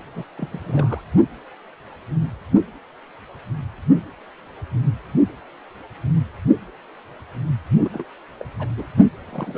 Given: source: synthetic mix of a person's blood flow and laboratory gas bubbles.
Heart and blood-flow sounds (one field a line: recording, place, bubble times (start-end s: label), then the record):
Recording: Doppler ultrasound of blood flow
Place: precordium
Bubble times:
0.14-0.25 s: bubbles
0.38-0.48 s: bubbles
0.52-1.01 s: bubbles
7.83-7.89 s: bubbles
7.92-8.04 s: bubbles
8.40-8.45 s: bubbles
8.59-8.68 s: bubbles
8.77-8.88 s: bubbles
9.21-9.58 s: bubbles
From the record:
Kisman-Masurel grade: 221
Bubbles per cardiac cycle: several, 3 to 8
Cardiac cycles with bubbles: 10 to 50%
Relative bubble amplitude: barely perceptible (0.100 to 0.250)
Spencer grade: 2 (many but less than half of the cardiac periods contain bubble signals, singularly or in groups)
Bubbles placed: only in the low amplitude regions of the cardiac cycle